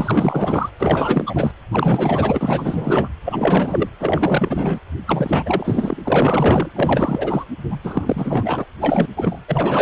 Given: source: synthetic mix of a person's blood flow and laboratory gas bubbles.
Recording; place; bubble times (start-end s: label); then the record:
Doppler ultrasound of blood flow; precordium
0.00-0.70 s: bubbles
0.78-1.52 s: bubbles
1.71-3.08 s: bubbles
3.24-3.88 s: bubbles
3.99-4.79 s: bubbles
5.06-6.00 s: bubbles
6.04-6.72 s: bubbles
6.75-7.45 s: bubbles
7.70-7.80 s: bubbles
7.83-8.65 s: bubbles
8.80-9.08 s: bubbles
9.16-9.40 s: bubbles
9.48-9.82 s: bubbles
From the record:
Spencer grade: 4 (maximum detectable bubble signal sounding continuously throughout systole and diastole of every cardiac period, and overriding the amplitude of the normal cardiac signals); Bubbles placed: anywhere in the cardiac cycle